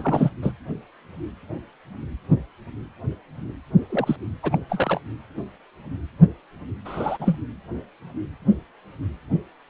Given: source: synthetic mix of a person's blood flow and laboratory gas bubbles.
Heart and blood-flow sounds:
Doppler ultrasound of blood flow; precordium
0.00-0.31 s: bubbles
0.42-0.51 s: bubbles
3.90-4.16 s: bubbles
4.42-4.58 s: bubbles
4.69-5.00 s: bubbles
6.85-7.37 s: bubbles
From the record:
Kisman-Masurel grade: 222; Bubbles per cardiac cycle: several, 3 to 8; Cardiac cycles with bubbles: 10 to 50%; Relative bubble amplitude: moderate (0.250 to 0.450); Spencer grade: 2 (many but less than half of the cardiac periods contain bubble signals, singularly or in groups); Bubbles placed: anywhere in the cardiac cycle

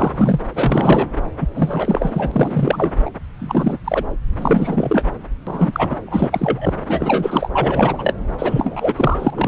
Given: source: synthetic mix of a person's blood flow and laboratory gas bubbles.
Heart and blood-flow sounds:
Doppler ultrasound of blood flow; subclavian vein
0.00-0.40 s: bubbles
0.53-1.08 s: bubbles
1.41-1.47 s: bubbles
1.55-2.92 s: bubbles
3.05-3.10 s: bubbles
3.39-3.79 s: bubbles
3.84-4.04 s: bubbles
4.38-5.05 s: bubbles
5.46-5.95 s: bubbles
6.06-6.73 s: bubbles
6.88-7.48 s: bubbles
7.51-8.13 s: bubbles
8.38-9.47 s: bubbles
From the record:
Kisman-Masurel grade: 343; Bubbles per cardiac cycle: rolling drumbeat, 9 or more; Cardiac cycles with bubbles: 100%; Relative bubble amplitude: loud (0.450 to 0.775); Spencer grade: 3 (all of the cardiac periods contain showers or single bubble signals, but not dominating or overriding the cardiac motion signals); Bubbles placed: anywhere in the cardiac cycle

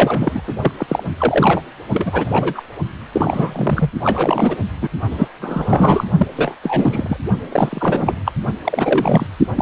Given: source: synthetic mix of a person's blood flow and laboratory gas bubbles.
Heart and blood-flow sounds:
Doppler ultrasound of blood flow; precordium
0.00-0.41 s: bubbles
0.47-0.53 s: bubbles
0.61-0.71 s: bubbles
0.77-1.03 s: bubbles
1.17-1.62 s: bubbles
1.93-2.62 s: bubbles
3.12-3.90 s: bubbles
4.04-4.57 s: bubbles
4.81-4.89 s: bubbles
5.11-5.28 s: bubbles
5.41-6.04 s: bubbles
6.17-6.28 s: bubbles
6.37-6.55 s: bubbles
6.62-7.17 s: bubbles
7.52-8.14 s: bubbles
8.25-8.32 s: bubbles
8.64-9.27 s: bubbles
9.56-9.61 s: bubbles
From the record:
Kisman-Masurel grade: 343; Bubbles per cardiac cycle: rolling drumbeat, 9 or more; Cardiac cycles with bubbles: 100%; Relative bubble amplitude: loud (0.450 to 0.775); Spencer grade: 3 (all of the cardiac periods contain showers or single bubble signals, but not dominating or overriding the cardiac motion signals); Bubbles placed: only in the low amplitude regions of the cardiac cycle

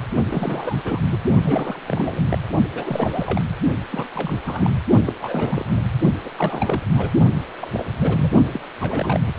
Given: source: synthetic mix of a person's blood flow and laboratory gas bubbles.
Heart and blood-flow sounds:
Doppler ultrasound of blood flow; precordium
0.25-1.02 s: bubbles
1.11-1.17 s: bubbles
1.41-1.79 s: bubbles
1.87-2.21 s: bubbles
2.31-2.38 s: bubbles
2.75-3.42 s: bubbles
3.90-4.08 s: bubbles
4.12-4.75 s: bubbles
5.06-5.15 s: bubbles
5.21-5.64 s: bubbles
5.69-5.82 s: bubbles
6.24-6.29 s: bubbles
6.37-6.86 s: bubbles
6.95-7.09 s: bubbles
7.60-7.85 s: bubbles
8.01-8.32 s: bubbles
8.53-8.60 s: bubbles
8.80-9.20 s: bubbles
9.25-9.33 s: bubbles
From the record:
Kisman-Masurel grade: 332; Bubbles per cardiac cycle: rolling drumbeat, 9 or more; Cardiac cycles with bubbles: 50 to 99%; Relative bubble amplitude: moderate (0.250 to 0.450); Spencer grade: 3 (all of the cardiac periods contain showers or single bubble signals, but not dominating or overriding the cardiac motion signals); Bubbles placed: only in the low amplitude regions of the cardiac cycle

